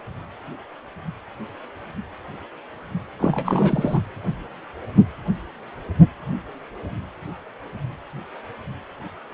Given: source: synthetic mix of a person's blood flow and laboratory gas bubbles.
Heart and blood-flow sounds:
Doppler ultrasound of blood flow; precordium
3.19-4.00 s: bubbles
From the record:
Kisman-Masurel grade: 212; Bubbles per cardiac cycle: several, 3 to 8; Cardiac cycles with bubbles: 1 to 10%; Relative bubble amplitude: moderate (0.250 to 0.450); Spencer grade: 1 (occasional bubble signal discernible with the cardiac motion signal, with majority of cardiac periods free of bubbles); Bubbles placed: anywhere in the cardiac cycle

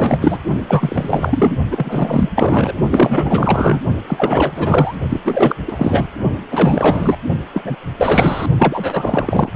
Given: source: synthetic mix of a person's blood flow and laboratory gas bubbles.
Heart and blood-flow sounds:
Doppler ultrasound of blood flow; precordium
0.00-0.39 s: bubbles
0.60-1.54 s: bubbles
1.71-2.30 s: bubbles
2.35-2.73 s: bubbles
2.88-3.80 s: bubbles
4.07-4.96 s: bubbles
5.09-5.21 s: bubbles
5.24-5.56 s: bubbles
5.67-6.08 s: bubbles
6.50-7.17 s: bubbles
7.54-7.76 s: bubbles
7.98-8.46 s: bubbles
8.58-9.49 s: bubbles
From the record:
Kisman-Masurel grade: 444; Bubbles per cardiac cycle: continuous sound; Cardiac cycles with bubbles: 100%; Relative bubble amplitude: maximal (0.775 to 0.999); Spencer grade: 4 (maximum detectable bubble signal sounding continuously throughout systole and diastole of every cardiac period, and overriding the amplitude of the normal cardiac signals); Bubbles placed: only in the low amplitude regions of the cardiac cycle

